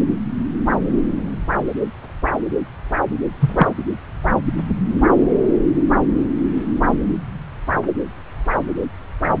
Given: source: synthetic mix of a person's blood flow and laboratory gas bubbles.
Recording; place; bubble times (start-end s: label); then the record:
Doppler ultrasound of blood flow; subclavian vein
3.40-3.67 s: bubbles
From the record:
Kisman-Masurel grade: 113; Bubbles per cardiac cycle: 1 to 2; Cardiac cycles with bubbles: 1 to 10%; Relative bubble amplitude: loud (0.450 to 0.775); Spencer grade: 1 (occasional bubble signal discernible with the cardiac motion signal, with majority of cardiac periods free of bubbles); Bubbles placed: anywhere in the cardiac cycle